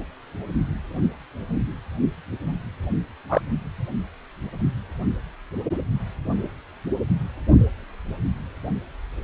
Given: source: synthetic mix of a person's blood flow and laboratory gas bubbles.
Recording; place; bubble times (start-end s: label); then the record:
Doppler ultrasound of blood flow; precordium
3.29-3.41 s: bubbles
From the record:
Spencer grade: 2 (many but less than half of the cardiac periods contain bubble signals, singularly or in groups); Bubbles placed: anywhere in the cardiac cycle